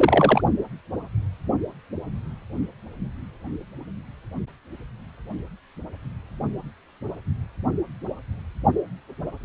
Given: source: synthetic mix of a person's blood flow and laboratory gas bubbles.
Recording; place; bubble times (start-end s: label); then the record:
Doppler ultrasound of blood flow; precordium
0.00-0.41 s: bubbles
From the record:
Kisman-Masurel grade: 223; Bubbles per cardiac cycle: several, 3 to 8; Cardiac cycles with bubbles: 10 to 50%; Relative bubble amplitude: loud (0.450 to 0.775); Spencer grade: 2 (many but less than half of the cardiac periods contain bubble signals, singularly or in groups); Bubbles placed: only in the low amplitude regions of the cardiac cycle